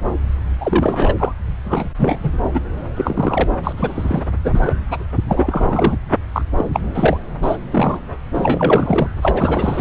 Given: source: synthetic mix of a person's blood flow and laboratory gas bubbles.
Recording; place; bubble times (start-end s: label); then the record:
Doppler ultrasound of blood flow; subclavian vein
0.60-1.14 s: bubbles
1.19-1.32 s: bubbles
1.65-1.89 s: bubbles
1.98-2.21 s: bubbles
2.23-2.30 s: bubbles
2.54-2.60 s: bubbles
2.96-3.44 s: bubbles
3.63-3.73 s: bubbles
3.77-4.22 s: bubbles
4.43-4.62 s: bubbles
4.65-4.73 s: bubbles
4.88-5.05 s: bubbles
5.29-5.96 s: bubbles
6.33-6.42 s: bubbles
6.57-6.64 s: bubbles
6.73-6.80 s: bubbles
6.94-7.18 s: bubbles
7.42-7.58 s: bubbles
7.72-8.00 s: bubbles
8.34-9.09 s: bubbles
9.21-9.81 s: bubbles
From the record:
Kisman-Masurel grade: 243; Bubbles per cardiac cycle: several, 3 to 8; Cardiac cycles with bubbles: 100%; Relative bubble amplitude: loud (0.450 to 0.775); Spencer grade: 3 (all of the cardiac periods contain showers or single bubble signals, but not dominating or overriding the cardiac motion signals); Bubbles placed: anywhere in the cardiac cycle